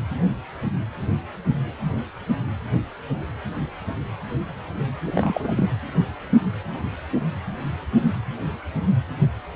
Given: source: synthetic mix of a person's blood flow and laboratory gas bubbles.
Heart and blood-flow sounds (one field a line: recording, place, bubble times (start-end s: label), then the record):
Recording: Doppler ultrasound of blood flow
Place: precordium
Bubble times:
5.07-5.11 s: bubbles
5.15-5.54 s: bubbles
5.56-5.68 s: bubbles
From the record:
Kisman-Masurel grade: 222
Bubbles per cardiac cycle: several, 3 to 8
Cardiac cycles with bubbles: 10 to 50%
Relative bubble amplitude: moderate (0.250 to 0.450)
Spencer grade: 2 (many but less than half of the cardiac periods contain bubble signals, singularly or in groups)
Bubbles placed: anywhere in the cardiac cycle